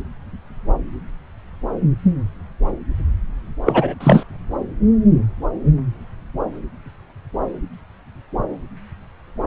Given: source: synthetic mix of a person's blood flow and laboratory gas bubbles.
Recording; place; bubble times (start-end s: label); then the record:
Doppler ultrasound of blood flow; subclavian vein
3.65-3.94 s: bubbles
4.00-4.23 s: bubbles
From the record:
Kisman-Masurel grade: 213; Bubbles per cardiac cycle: several, 3 to 8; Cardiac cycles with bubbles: 1 to 10%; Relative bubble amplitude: loud (0.450 to 0.775); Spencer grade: 1 (occasional bubble signal discernible with the cardiac motion signal, with majority of cardiac periods free of bubbles); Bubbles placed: anywhere in the cardiac cycle